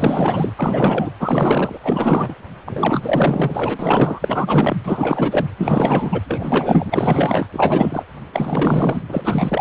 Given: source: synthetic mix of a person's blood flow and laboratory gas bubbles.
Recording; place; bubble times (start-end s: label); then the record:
Doppler ultrasound of blood flow; precordium
0.00-0.53 s: bubbles
0.57-1.10 s: bubbles
1.20-1.78 s: bubbles
1.82-2.34 s: bubbles
2.65-4.77 s: bubbles
4.84-5.48 s: bubbles
5.58-6.21 s: bubbles
6.29-7.46 s: bubbles
7.53-8.03 s: bubbles
8.32-8.99 s: bubbles
9.08-9.61 s: bubbles
From the record:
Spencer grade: 4 (maximum detectable bubble signal sounding continuously throughout systole and diastole of every cardiac period, and overriding the amplitude of the normal cardiac signals); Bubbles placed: anywhere in the cardiac cycle